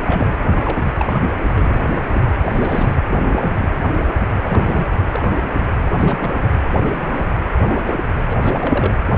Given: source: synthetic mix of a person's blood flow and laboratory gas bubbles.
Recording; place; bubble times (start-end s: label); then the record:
Doppler ultrasound of blood flow; precordium
0.06-0.31 s: bubbles
0.54-0.91 s: bubbles
0.99-1.20 s: bubbles
1.55-2.00 s: bubbles
2.13-2.21 s: bubbles
2.46-3.01 s: bubbles
3.28-3.69 s: bubbles
4.44-4.91 s: bubbles
5.14-5.53 s: bubbles
5.90-6.51 s: bubbles
6.83-7.28 s: bubbles
7.62-7.82 s: bubbles
7.85-8.02 s: bubbles
8.28-8.36 s: bubbles
8.43-8.94 s: bubbles
From the record:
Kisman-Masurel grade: 242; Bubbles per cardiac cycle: several, 3 to 8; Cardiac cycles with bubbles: 100%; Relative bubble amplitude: moderate (0.250 to 0.450); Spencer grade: 3 (all of the cardiac periods contain showers or single bubble signals, but not dominating or overriding the cardiac motion signals); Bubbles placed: anywhere in the cardiac cycle